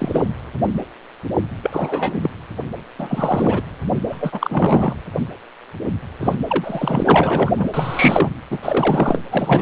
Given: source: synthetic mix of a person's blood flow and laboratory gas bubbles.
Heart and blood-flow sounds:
Doppler ultrasound of blood flow; precordium
0.00-0.24 s: bubbles
1.63-2.30 s: bubbles
2.98-3.62 s: bubbles
4.08-4.95 s: bubbles
6.20-6.36 s: bubbles
6.47-7.53 s: bubbles
7.57-7.67 s: bubbles
7.73-8.34 s: bubbles
8.50-8.59 s: bubbles
8.62-9.21 s: bubbles
9.30-9.62 s: bubbles
From the record:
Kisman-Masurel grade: 332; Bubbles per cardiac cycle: rolling drumbeat, 9 or more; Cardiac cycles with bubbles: 50 to 99%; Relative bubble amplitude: moderate (0.250 to 0.450); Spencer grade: 3 (all of the cardiac periods contain showers or single bubble signals, but not dominating or overriding the cardiac motion signals); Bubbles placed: anywhere in the cardiac cycle

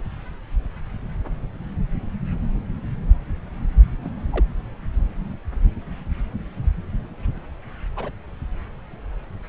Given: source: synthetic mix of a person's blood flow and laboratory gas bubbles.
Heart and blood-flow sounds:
Doppler ultrasound of blood flow; subclavian vein
4.02-4.10 s: bubbles
4.31-4.46 s: bubbles
7.96-8.11 s: bubbles
From the record:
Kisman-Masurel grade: 121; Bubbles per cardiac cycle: 1 to 2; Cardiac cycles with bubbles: 10 to 50%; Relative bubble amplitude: barely perceptible (0.100 to 0.250); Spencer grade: 2 (many but less than half of the cardiac periods contain bubble signals, singularly or in groups); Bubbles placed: anywhere in the cardiac cycle

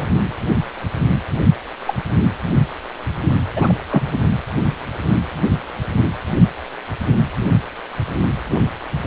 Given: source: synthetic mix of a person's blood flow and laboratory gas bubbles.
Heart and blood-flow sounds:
Doppler ultrasound of blood flow; precordium
0.00-0.06 s: bubbles
1.86-1.96 s: bubbles
3.56-3.73 s: bubbles
3.91-4.02 s: bubbles
From the record:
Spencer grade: 2 (many but less than half of the cardiac periods contain bubble signals, singularly or in groups); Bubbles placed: anywhere in the cardiac cycle

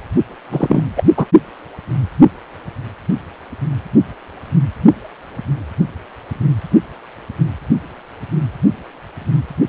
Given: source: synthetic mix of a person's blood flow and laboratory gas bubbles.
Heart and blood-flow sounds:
Doppler ultrasound of blood flow; precordium
0.52-0.82 s: bubbles
0.96-1.04 s: bubbles
1.17-1.25 s: bubbles
From the record:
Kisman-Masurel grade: 213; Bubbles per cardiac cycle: several, 3 to 8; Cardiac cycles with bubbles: 1 to 10%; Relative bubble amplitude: loud (0.450 to 0.775); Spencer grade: 1 (occasional bubble signal discernible with the cardiac motion signal, with majority of cardiac periods free of bubbles); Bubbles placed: only in the low amplitude regions of the cardiac cycle

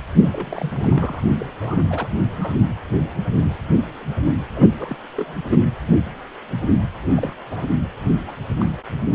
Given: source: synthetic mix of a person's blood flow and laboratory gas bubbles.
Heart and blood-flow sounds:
Doppler ultrasound of blood flow; precordium
0.32-1.23 s: bubbles
1.39-1.46 s: bubbles
1.61-1.83 s: bubbles
1.90-2.08 s: bubbles
2.29-2.53 s: bubbles
4.56-4.67 s: bubbles
4.77-4.98 s: bubbles
5.17-5.41 s: bubbles
5.51-5.57 s: bubbles
7.14-7.36 s: bubbles
7.51-7.63 s: bubbles
8.27-8.31 s: bubbles
8.59-8.71 s: bubbles
From the record:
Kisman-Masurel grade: 221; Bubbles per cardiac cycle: several, 3 to 8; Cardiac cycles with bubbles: 10 to 50%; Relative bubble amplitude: barely perceptible (0.100 to 0.250); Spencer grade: 2 (many but less than half of the cardiac periods contain bubble signals, singularly or in groups); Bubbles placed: anywhere in the cardiac cycle

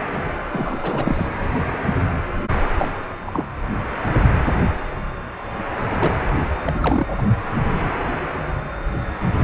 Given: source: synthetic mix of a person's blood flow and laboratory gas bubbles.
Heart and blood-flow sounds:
Doppler ultrasound of blood flow; precordium
0.51-1.32 s: bubbles
2.77-2.90 s: bubbles
3.25-3.47 s: bubbles
5.92-6.14 s: bubbles
6.65-7.07 s: bubbles
7.19-7.23 s: bubbles
From the record:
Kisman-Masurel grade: 222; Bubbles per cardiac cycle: several, 3 to 8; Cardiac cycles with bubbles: 10 to 50%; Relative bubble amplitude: moderate (0.250 to 0.450); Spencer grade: 2 (many but less than half of the cardiac periods contain bubble signals, singularly or in groups); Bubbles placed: anywhere in the cardiac cycle

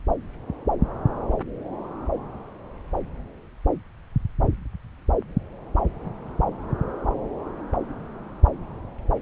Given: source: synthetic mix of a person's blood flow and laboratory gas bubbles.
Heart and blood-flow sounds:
Doppler ultrasound of blood flow; subclavian vein
no bubbles
From the record:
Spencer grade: 0 (complete lack of bubble signals)

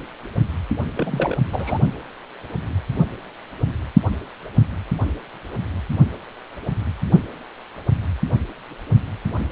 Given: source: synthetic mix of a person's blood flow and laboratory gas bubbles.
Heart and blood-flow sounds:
Doppler ultrasound of blood flow; precordium
0.97-1.37 s: bubbles
1.52-1.79 s: bubbles
From the record:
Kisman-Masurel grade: 212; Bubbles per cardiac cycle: several, 3 to 8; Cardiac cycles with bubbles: 1 to 10%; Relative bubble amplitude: moderate (0.250 to 0.450); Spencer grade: 1 (occasional bubble signal discernible with the cardiac motion signal, with majority of cardiac periods free of bubbles); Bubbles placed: only in the low amplitude regions of the cardiac cycle

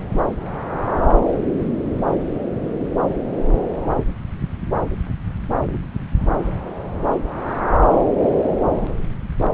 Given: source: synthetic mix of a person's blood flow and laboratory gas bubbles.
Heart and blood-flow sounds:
Doppler ultrasound of blood flow; subclavian vein
5.73-5.82 s: bubbles
7.90-7.96 s: bubbles
From the record:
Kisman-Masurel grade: 111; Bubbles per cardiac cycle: 1 to 2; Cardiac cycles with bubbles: 1 to 10%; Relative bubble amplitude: barely perceptible (0.100 to 0.250); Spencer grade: 1 (occasional bubble signal discernible with the cardiac motion signal, with majority of cardiac periods free of bubbles); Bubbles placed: anywhere in the cardiac cycle

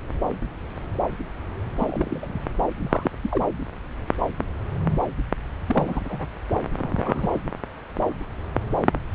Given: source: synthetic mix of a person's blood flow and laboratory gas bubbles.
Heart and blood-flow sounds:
Doppler ultrasound of blood flow; subclavian vein
1.79-2.39 s: bubbles
2.75-3.10 s: bubbles
3.23-3.46 s: bubbles
5.68-6.27 s: bubbles
6.76-7.28 s: bubbles
7.32-7.41 s: bubbles
From the record:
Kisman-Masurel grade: 221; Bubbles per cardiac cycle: several, 3 to 8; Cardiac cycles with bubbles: 10 to 50%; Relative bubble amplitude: barely perceptible (0.100 to 0.250); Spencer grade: 2 (many but less than half of the cardiac periods contain bubble signals, singularly or in groups); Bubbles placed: anywhere in the cardiac cycle

